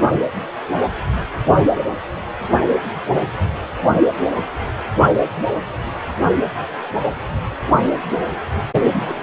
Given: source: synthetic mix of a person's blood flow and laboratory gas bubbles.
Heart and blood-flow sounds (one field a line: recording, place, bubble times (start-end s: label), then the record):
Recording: Doppler ultrasound of blood flow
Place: precordium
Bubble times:
8.91-9.23 s: bubbles
From the record:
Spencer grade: 1 (occasional bubble signal discernible with the cardiac motion signal, with majority of cardiac periods free of bubbles)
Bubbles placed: only in the low amplitude regions of the cardiac cycle